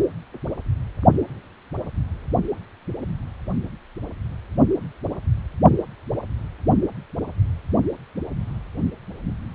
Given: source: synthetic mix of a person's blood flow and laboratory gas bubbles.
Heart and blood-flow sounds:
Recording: Doppler ultrasound of blood flow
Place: precordium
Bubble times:
no bubbles
From the record:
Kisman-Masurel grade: 000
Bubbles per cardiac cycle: 0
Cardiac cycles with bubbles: 0%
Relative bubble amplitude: no bubbles discernible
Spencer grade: 0 (complete lack of bubble signals)

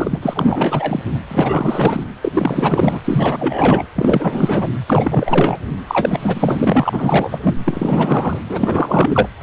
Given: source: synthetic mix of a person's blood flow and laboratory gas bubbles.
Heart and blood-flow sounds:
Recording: Doppler ultrasound of blood flow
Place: precordium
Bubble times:
0.00-0.19 s: bubbles
0.22-1.02 s: bubbles
1.29-2.04 s: bubbles
2.23-2.98 s: bubbles
3.04-3.85 s: bubbles
3.96-4.68 s: bubbles
4.89-5.59 s: bubbles
5.87-7.39 s: bubbles
7.42-7.55 s: bubbles
7.66-8.39 s: bubbles
8.48-9.29 s: bubbles
From the record:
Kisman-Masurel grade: 444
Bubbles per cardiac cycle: continuous sound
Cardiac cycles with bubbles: 100%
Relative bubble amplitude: maximal (0.775 to 0.999)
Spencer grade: 4 (maximum detectable bubble signal sounding continuously throughout systole and diastole of every cardiac period, and overriding the amplitude of the normal cardiac signals)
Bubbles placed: anywhere in the cardiac cycle

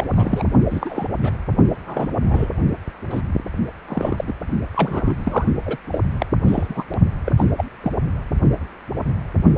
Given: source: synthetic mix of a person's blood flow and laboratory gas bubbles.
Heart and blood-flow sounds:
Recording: Doppler ultrasound of blood flow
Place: precordium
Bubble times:
0.00-0.06 s: bubbles
0.10-0.47 s: bubbles
0.70-1.08 s: bubbles
1.23-1.31 s: bubbles
1.86-2.07 s: bubbles
2.25-2.49 s: bubbles
3.09-3.23 s: bubbles
3.89-4.25 s: bubbles
4.27-4.33 s: bubbles
4.75-5.14 s: bubbles
5.19-5.45 s: bubbles
5.66-5.77 s: bubbles
5.92-6.00 s: bubbles
6.20-6.26 s: bubbles
6.44-6.91 s: bubbles
7.25-7.32 s: bubbles
7.37-7.44 s: bubbles
7.58-7.64 s: bubbles
7.83-7.92 s: bubbles
From the record:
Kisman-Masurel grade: 232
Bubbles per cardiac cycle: several, 3 to 8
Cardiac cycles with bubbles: 50 to 99%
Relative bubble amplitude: moderate (0.250 to 0.450)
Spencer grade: 3 (all of the cardiac periods contain showers or single bubble signals, but not dominating or overriding the cardiac motion signals)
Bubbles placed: only in the low amplitude regions of the cardiac cycle

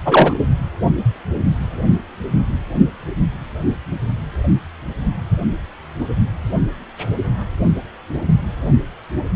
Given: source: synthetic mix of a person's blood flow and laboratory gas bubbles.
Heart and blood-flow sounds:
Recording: Doppler ultrasound of blood flow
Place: precordium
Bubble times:
0.05-0.35 s: bubbles
From the record:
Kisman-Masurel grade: 213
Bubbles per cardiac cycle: several, 3 to 8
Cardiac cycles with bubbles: 1 to 10%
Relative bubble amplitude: loud (0.450 to 0.775)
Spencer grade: 1 (occasional bubble signal discernible with the cardiac motion signal, with majority of cardiac periods free of bubbles)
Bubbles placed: only in the low amplitude regions of the cardiac cycle

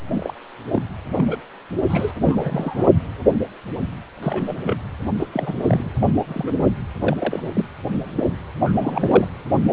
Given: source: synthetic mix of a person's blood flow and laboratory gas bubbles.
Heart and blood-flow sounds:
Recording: Doppler ultrasound of blood flow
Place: precordium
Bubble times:
0.14-0.34 s: bubbles
0.72-0.82 s: bubbles
1.15-1.25 s: bubbles
1.29-1.37 s: bubbles
1.89-2.12 s: bubbles
2.21-2.86 s: bubbles
4.22-4.54 s: bubbles
4.62-4.75 s: bubbles
5.18-5.27 s: bubbles
5.33-5.54 s: bubbles
5.62-5.92 s: bubbles
6.01-6.07 s: bubbles
6.13-6.20 s: bubbles
6.28-6.68 s: bubbles
7.00-7.17 s: bubbles
7.20-7.69 s: bubbles
8.15-8.23 s: bubbles
8.61-9.28 s: bubbles
From the record:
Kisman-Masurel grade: 242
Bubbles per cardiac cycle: several, 3 to 8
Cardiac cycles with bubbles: 100%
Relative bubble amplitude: moderate (0.250 to 0.450)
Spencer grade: 3 (all of the cardiac periods contain showers or single bubble signals, but not dominating or overriding the cardiac motion signals)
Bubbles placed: anywhere in the cardiac cycle

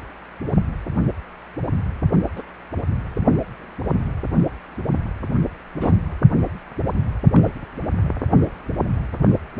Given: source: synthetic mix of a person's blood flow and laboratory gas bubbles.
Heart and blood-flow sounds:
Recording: Doppler ultrasound of blood flow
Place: precordium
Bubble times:
2.35-2.42 s: bubbles
5.74-5.93 s: bubbles
7.33-7.51 s: bubbles
From the record:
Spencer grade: 2 (many but less than half of the cardiac periods contain bubble signals, singularly or in groups)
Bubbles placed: anywhere in the cardiac cycle

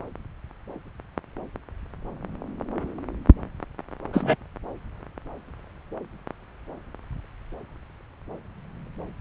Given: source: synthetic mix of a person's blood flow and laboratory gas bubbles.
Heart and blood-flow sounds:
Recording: Doppler ultrasound of blood flow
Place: subclavian vein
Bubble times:
4.12-4.35 s: bubbles
From the record:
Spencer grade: 2 (many but less than half of the cardiac periods contain bubble signals, singularly or in groups)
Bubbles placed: anywhere in the cardiac cycle

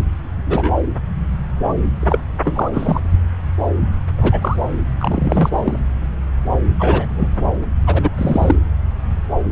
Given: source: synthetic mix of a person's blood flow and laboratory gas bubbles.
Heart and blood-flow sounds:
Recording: Doppler ultrasound of blood flow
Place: subclavian vein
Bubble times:
0.45-0.74 s: bubbles
1.62-1.73 s: bubbles
2.00-2.23 s: bubbles
2.44-3.00 s: bubbles
4.18-4.57 s: bubbles
5.00-5.50 s: bubbles
5.52-5.79 s: bubbles
6.79-7.07 s: bubbles
7.16-7.28 s: bubbles
7.86-8.08 s: bubbles
8.17-8.55 s: bubbles
From the record:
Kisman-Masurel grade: 233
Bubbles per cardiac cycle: several, 3 to 8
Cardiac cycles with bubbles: 50 to 99%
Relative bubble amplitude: loud (0.450 to 0.775)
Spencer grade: 3 (all of the cardiac periods contain showers or single bubble signals, but not dominating or overriding the cardiac motion signals)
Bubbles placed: anywhere in the cardiac cycle

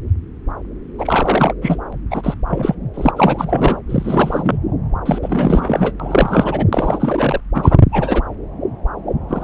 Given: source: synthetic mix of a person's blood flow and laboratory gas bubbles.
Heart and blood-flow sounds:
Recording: Doppler ultrasound of blood flow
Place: subclavian vein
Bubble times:
0.98-1.53 s: bubbles
1.61-1.78 s: bubbles
2.10-2.35 s: bubbles
2.47-2.75 s: bubbles
2.94-3.11 s: bubbles
3.16-3.79 s: bubbles
3.89-4.58 s: bubbles
5.05-5.19 s: bubbles
5.22-5.93 s: bubbles
6.00-6.65 s: bubbles
6.73-7.41 s: bubbles
7.54-7.78 s: bubbles
7.92-8.22 s: bubbles
9.29-9.44 s: bubbles
From the record:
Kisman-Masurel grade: 333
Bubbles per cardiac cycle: rolling drumbeat, 9 or more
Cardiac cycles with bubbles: 50 to 99%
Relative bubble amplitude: loud (0.450 to 0.775)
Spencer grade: 3 (all of the cardiac periods contain showers or single bubble signals, but not dominating or overriding the cardiac motion signals)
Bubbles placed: anywhere in the cardiac cycle

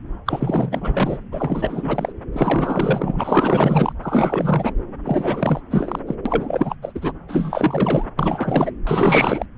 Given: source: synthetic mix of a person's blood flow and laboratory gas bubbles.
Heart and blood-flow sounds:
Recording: Doppler ultrasound of blood flow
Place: subclavian vein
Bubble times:
0.26-1.19 s: bubbles
1.31-2.12 s: bubbles
2.32-3.93 s: bubbles
4.02-4.73 s: bubbles
5.05-5.61 s: bubbles
5.70-5.99 s: bubbles
6.07-6.15 s: bubbles
6.25-6.75 s: bubbles
6.82-7.12 s: bubbles
7.28-8.05 s: bubbles
8.19-8.71 s: bubbles
8.87-9.46 s: bubbles
From the record:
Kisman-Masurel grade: 444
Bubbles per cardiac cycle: continuous sound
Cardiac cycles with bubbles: 100%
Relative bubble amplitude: maximal (0.775 to 0.999)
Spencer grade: 4 (maximum detectable bubble signal sounding continuously throughout systole and diastole of every cardiac period, and overriding the amplitude of the normal cardiac signals)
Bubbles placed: anywhere in the cardiac cycle

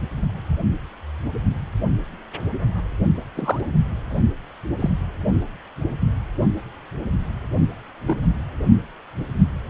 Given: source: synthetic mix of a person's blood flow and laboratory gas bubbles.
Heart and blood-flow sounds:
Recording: Doppler ultrasound of blood flow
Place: precordium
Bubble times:
3.35-3.60 s: bubbles
4.79-4.90 s: bubbles
5.33-5.41 s: bubbles
8.06-8.17 s: bubbles
From the record:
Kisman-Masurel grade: 123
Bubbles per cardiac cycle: 1 to 2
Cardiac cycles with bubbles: 10 to 50%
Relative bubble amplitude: loud (0.450 to 0.775)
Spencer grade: 2 (many but less than half of the cardiac periods contain bubble signals, singularly or in groups)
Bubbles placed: only in the low amplitude regions of the cardiac cycle

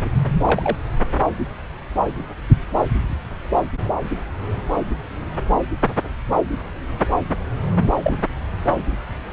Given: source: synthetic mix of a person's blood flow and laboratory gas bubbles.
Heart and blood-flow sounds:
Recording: Doppler ultrasound of blood flow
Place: subclavian vein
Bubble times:
0.04-0.10 s: bubbles
0.45-0.77 s: bubbles
8.03-8.26 s: bubbles
From the record:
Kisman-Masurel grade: 122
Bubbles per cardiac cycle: 1 to 2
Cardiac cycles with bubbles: 10 to 50%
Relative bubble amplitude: moderate (0.250 to 0.450)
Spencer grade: 2 (many but less than half of the cardiac periods contain bubble signals, singularly or in groups)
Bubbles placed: anywhere in the cardiac cycle

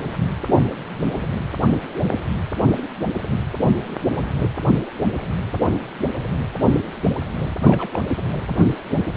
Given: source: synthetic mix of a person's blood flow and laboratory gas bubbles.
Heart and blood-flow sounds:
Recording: Doppler ultrasound of blood flow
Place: precordium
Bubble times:
7.61-7.89 s: bubbles
7.93-8.01 s: bubbles
8.09-8.17 s: bubbles
From the record:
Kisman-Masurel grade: 212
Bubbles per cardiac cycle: several, 3 to 8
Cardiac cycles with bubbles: 1 to 10%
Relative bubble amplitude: moderate (0.250 to 0.450)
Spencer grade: 1 (occasional bubble signal discernible with the cardiac motion signal, with majority of cardiac periods free of bubbles)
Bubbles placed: anywhere in the cardiac cycle

